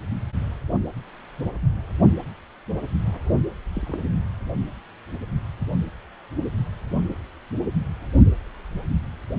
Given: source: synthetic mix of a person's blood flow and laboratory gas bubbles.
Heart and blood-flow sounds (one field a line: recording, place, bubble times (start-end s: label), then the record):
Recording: Doppler ultrasound of blood flow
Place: precordium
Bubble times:
3.75-3.98 s: bubbles
From the record:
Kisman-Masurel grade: 111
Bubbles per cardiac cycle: 1 to 2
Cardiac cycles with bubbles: 1 to 10%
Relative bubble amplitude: barely perceptible (0.100 to 0.250)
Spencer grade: 1 (occasional bubble signal discernible with the cardiac motion signal, with majority of cardiac periods free of bubbles)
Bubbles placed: only in the low amplitude regions of the cardiac cycle